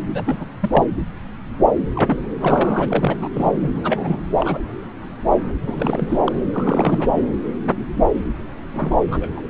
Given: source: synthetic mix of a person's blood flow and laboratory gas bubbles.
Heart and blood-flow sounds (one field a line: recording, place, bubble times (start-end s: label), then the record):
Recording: Doppler ultrasound of blood flow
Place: subclavian vein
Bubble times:
0.14-0.46 s: bubbles
0.61-0.85 s: bubbles
1.95-2.18 s: bubbles
2.41-3.17 s: bubbles
3.21-3.28 s: bubbles
3.33-3.52 s: bubbles
3.62-3.69 s: bubbles
3.75-4.21 s: bubbles
4.36-4.58 s: bubbles
5.67-6.18 s: bubbles
6.25-6.32 s: bubbles
6.52-7.23 s: bubbles
8.73-9.44 s: bubbles
From the record:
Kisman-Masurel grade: 332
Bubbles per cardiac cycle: rolling drumbeat, 9 or more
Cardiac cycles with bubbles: 50 to 99%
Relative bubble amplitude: moderate (0.250 to 0.450)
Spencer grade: 3 (all of the cardiac periods contain showers or single bubble signals, but not dominating or overriding the cardiac motion signals)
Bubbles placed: anywhere in the cardiac cycle